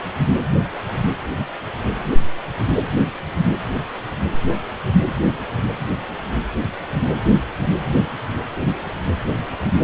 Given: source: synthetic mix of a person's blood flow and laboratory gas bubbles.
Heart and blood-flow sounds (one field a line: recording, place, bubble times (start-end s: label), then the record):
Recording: Doppler ultrasound of blood flow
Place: precordium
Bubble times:
9.65-9.71 s: bubbles
9.75-9.84 s: bubbles
From the record:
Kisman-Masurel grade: 111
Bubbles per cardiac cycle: 1 to 2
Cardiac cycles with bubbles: 1 to 10%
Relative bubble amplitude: barely perceptible (0.100 to 0.250)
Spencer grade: 1 (occasional bubble signal discernible with the cardiac motion signal, with majority of cardiac periods free of bubbles)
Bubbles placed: anywhere in the cardiac cycle